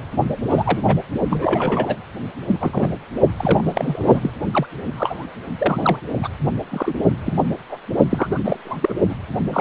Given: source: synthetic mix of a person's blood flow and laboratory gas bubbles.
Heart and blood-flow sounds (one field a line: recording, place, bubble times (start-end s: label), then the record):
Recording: Doppler ultrasound of blood flow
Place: precordium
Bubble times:
0.50-0.82 s: bubbles
0.87-1.02 s: bubbles
1.29-1.97 s: bubbles
2.47-2.57 s: bubbles
2.60-2.93 s: bubbles
3.36-4.29 s: bubbles
4.52-4.67 s: bubbles
4.83-5.29 s: bubbles
5.58-6.00 s: bubbles
6.21-6.29 s: bubbles
6.70-6.94 s: bubbles
7.25-7.34 s: bubbles
7.70-7.78 s: bubbles
8.10-8.56 s: bubbles
8.64-8.77 s: bubbles
8.80-8.94 s: bubbles
9.09-9.16 s: bubbles
9.45-9.61 s: bubbles
From the record:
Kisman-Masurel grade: 242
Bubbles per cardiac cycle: several, 3 to 8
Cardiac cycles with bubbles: 100%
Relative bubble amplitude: moderate (0.250 to 0.450)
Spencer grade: 3 (all of the cardiac periods contain showers or single bubble signals, but not dominating or overriding the cardiac motion signals)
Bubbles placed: only in the low amplitude regions of the cardiac cycle